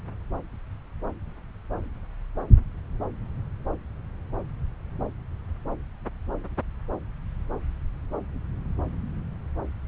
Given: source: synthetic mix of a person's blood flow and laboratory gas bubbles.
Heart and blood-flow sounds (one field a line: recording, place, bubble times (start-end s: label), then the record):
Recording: Doppler ultrasound of blood flow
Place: subclavian vein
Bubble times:
no bubbles
From the record:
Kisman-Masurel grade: 000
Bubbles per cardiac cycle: 0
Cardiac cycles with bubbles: 0%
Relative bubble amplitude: no bubbles discernible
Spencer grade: 0 (complete lack of bubble signals)